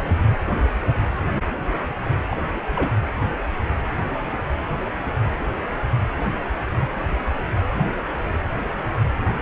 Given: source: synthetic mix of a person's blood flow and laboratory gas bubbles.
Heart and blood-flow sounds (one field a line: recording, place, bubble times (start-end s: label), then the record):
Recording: Doppler ultrasound of blood flow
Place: precordium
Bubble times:
2.29-2.37 s: bubbles
2.75-2.96 s: bubbles
From the record:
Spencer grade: 2 (many but less than half of the cardiac periods contain bubble signals, singularly or in groups)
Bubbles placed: anywhere in the cardiac cycle